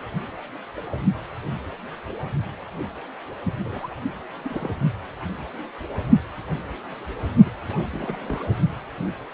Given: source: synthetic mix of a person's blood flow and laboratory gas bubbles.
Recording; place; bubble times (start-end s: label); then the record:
Doppler ultrasound of blood flow; precordium
3.60-3.94 s: bubbles
4.45-4.71 s: bubbles
7.45-7.50 s: bubbles
7.68-7.83 s: bubbles
7.90-8.16 s: bubbles
8.27-8.43 s: bubbles
8.46-8.56 s: bubbles
From the record:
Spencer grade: 2 (many but less than half of the cardiac periods contain bubble signals, singularly or in groups); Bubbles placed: only in the low amplitude regions of the cardiac cycle